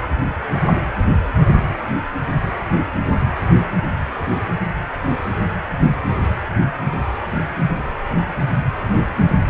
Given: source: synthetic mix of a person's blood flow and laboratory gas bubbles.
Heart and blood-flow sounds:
Doppler ultrasound of blood flow; precordium
no bubbles
From the record:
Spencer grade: 0 (complete lack of bubble signals)

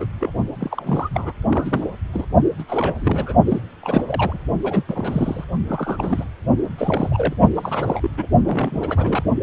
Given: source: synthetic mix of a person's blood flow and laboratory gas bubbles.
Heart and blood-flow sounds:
Doppler ultrasound of blood flow; precordium
0.00-0.06 s: bubbles
0.19-0.34 s: bubbles
0.59-1.09 s: bubbles
1.14-1.31 s: bubbles
1.48-1.90 s: bubbles
2.13-2.26 s: bubbles
2.58-2.63 s: bubbles
2.68-2.94 s: bubbles
2.97-3.33 s: bubbles
3.46-3.60 s: bubbles
3.82-4.38 s: bubbles
4.63-4.83 s: bubbles
4.88-5.45 s: bubbles
5.67-6.25 s: bubbles
6.78-7.34 s: bubbles
7.54-8.10 s: bubbles
8.17-8.27 s: bubbles
8.43-9.24 s: bubbles
From the record:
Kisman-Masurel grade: 342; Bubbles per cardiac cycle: rolling drumbeat, 9 or more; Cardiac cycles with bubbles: 100%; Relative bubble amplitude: moderate (0.250 to 0.450); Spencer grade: 3 (all of the cardiac periods contain showers or single bubble signals, but not dominating or overriding the cardiac motion signals); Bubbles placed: only in the low amplitude regions of the cardiac cycle

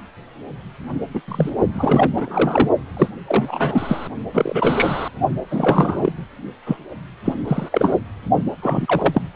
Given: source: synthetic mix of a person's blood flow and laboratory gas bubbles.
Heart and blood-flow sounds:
Doppler ultrasound of blood flow; precordium
1.13-1.22 s: bubbles
1.28-1.50 s: bubbles
1.73-2.09 s: bubbles
2.16-2.69 s: bubbles
2.96-3.08 s: bubbles
3.27-4.08 s: bubbles
4.34-5.08 s: bubbles
5.50-6.12 s: bubbles
6.66-6.77 s: bubbles
7.25-7.34 s: bubbles
7.48-7.68 s: bubbles
7.72-7.95 s: bubbles
8.62-9.22 s: bubbles
From the record:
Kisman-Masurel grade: 243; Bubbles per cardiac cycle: several, 3 to 8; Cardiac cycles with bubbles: 100%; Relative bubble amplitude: loud (0.450 to 0.775); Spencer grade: 3 (all of the cardiac periods contain showers or single bubble signals, but not dominating or overriding the cardiac motion signals); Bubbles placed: only in the low amplitude regions of the cardiac cycle

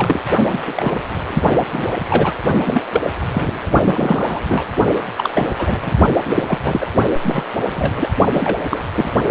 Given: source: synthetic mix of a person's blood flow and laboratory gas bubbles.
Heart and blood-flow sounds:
Doppler ultrasound of blood flow; precordium
0.00-0.20 s: bubbles
0.50-0.60 s: bubbles
0.67-0.74 s: bubbles
0.76-0.97 s: bubbles
1.27-1.43 s: bubbles
1.72-2.35 s: bubbles
2.65-2.85 s: bubbles
2.92-3.10 s: bubbles
3.31-3.54 s: bubbles
3.83-4.41 s: bubbles
4.48-4.64 s: bubbles
5.17-5.30 s: bubbles
5.35-5.51 s: bubbles
5.58-5.79 s: bubbles
5.82-5.90 s: bubbles
6.25-6.86 s: bubbles
7.22-7.45 s: bubbles
7.68-8.08 s: bubbles
8.33-8.59 s: bubbles
8.70-8.80 s: bubbles
8.94-9.09 s: bubbles
From the record:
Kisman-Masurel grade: 242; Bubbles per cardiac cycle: several, 3 to 8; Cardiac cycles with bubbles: 100%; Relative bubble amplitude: moderate (0.250 to 0.450); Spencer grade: 3 (all of the cardiac periods contain showers or single bubble signals, but not dominating or overriding the cardiac motion signals); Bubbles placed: only in the low amplitude regions of the cardiac cycle

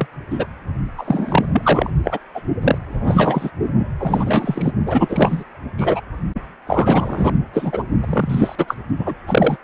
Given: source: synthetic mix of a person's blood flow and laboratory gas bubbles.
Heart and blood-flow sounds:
Doppler ultrasound of blood flow; precordium
0.00-0.07 s: bubbles
0.30-0.46 s: bubbles
0.97-1.46 s: bubbles
1.51-1.90 s: bubbles
2.04-2.19 s: bubbles
2.35-2.41 s: bubbles
2.62-2.78 s: bubbles
2.91-3.50 s: bubbles
3.99-4.72 s: bubbles
4.86-5.44 s: bubbles
5.78-6.01 s: bubbles
6.66-7.32 s: bubbles
7.53-7.83 s: bubbles
8.00-8.75 s: bubbles
8.99-9.13 s: bubbles
9.27-9.58 s: bubbles
From the record:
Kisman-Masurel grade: 343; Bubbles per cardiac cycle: rolling drumbeat, 9 or more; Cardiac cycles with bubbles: 100%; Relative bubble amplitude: loud (0.450 to 0.775); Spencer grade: 3 (all of the cardiac periods contain showers or single bubble signals, but not dominating or overriding the cardiac motion signals); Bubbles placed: only in the low amplitude regions of the cardiac cycle

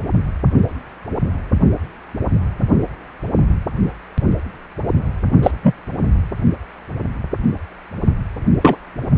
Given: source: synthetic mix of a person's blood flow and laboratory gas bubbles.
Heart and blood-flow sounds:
Doppler ultrasound of blood flow; precordium
5.42-5.51 s: bubbles
5.62-5.75 s: bubbles
8.61-8.76 s: bubbles
From the record:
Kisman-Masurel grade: 123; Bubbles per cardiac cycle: 1 to 2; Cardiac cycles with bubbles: 10 to 50%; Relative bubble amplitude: loud (0.450 to 0.775); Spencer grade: 2 (many but less than half of the cardiac periods contain bubble signals, singularly or in groups); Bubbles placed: only in the low amplitude regions of the cardiac cycle

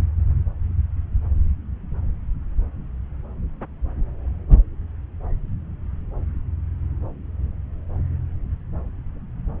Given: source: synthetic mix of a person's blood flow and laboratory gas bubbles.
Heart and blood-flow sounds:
Doppler ultrasound of blood flow; subclavian vein
no bubbles
From the record:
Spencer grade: 0 (complete lack of bubble signals)

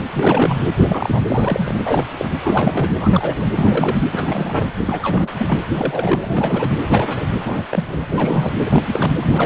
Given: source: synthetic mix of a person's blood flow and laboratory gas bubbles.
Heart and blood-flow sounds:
Doppler ultrasound of blood flow; precordium
0.00-0.02 s: bubbles
0.14-0.56 s: bubbles
0.78-1.23 s: bubbles
1.26-1.78 s: bubbles
1.84-2.04 s: bubbles
2.18-2.29 s: bubbles
2.42-2.90 s: bubbles
3.00-3.46 s: bubbles
3.56-3.98 s: bubbles
4.11-4.67 s: bubbles
4.86-5.00 s: bubbles
5.02-5.62 s: bubbles
5.74-6.19 s: bubbles
6.23-6.70 s: bubbles
6.81-7.35 s: bubbles
7.46-7.65 s: bubbles
7.71-7.85 s: bubbles
7.88-8.52 s: bubbles
8.65-8.82 s: bubbles
8.86-9.16 s: bubbles
9.20-9.46 s: bubbles
From the record:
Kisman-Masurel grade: 342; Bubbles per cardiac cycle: rolling drumbeat, 9 or more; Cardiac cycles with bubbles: 100%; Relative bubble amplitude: moderate (0.250 to 0.450); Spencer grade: 3 (all of the cardiac periods contain showers or single bubble signals, but not dominating or overriding the cardiac motion signals); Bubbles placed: anywhere in the cardiac cycle

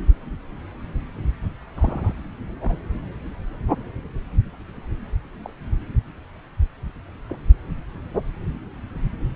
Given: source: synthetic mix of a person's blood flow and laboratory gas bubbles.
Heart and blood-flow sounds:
Doppler ultrasound of blood flow; subclavian vein
1.76-2.14 s: bubbles
2.61-2.77 s: bubbles
5.42-5.53 s: bubbles
7.28-7.35 s: bubbles
From the record:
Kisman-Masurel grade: 121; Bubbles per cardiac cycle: 1 to 2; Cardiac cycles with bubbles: 10 to 50%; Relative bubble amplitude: barely perceptible (0.100 to 0.250); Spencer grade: 2 (many but less than half of the cardiac periods contain bubble signals, singularly or in groups); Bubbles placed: anywhere in the cardiac cycle

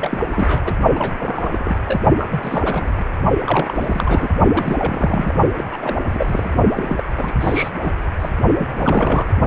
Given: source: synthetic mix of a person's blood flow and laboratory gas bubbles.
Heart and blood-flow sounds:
Doppler ultrasound of blood flow; precordium
0.00-0.18 s: bubbles
0.31-0.74 s: bubbles
0.95-1.77 s: bubbles
1.85-2.01 s: bubbles
2.18-3.04 s: bubbles
3.40-4.30 s: bubbles
4.53-5.33 s: bubbles
5.57-5.64 s: bubbles
5.69-5.77 s: bubbles
5.82-5.98 s: bubbles
6.12-6.50 s: bubbles
6.75-7.03 s: bubbles
7.15-7.33 s: bubbles
7.40-7.69 s: bubbles
7.83-7.92 s: bubbles
8.20-8.30 s: bubbles
8.58-8.68 s: bubbles
8.77-9.29 s: bubbles
From the record:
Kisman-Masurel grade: 342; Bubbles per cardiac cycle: rolling drumbeat, 9 or more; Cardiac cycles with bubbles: 100%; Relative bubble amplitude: moderate (0.250 to 0.450); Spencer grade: 3 (all of the cardiac periods contain showers or single bubble signals, but not dominating or overriding the cardiac motion signals); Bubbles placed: only in the low amplitude regions of the cardiac cycle

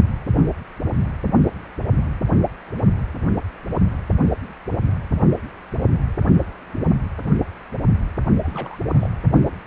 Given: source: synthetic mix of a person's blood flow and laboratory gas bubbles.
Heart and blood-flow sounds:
Doppler ultrasound of blood flow; precordium
8.38-8.78 s: bubbles
8.93-9.09 s: bubbles
From the record:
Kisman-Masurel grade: 211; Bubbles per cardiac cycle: several, 3 to 8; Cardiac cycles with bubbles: 1 to 10%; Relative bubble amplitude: barely perceptible (0.100 to 0.250); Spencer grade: 1 (occasional bubble signal discernible with the cardiac motion signal, with majority of cardiac periods free of bubbles); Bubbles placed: only in the low amplitude regions of the cardiac cycle

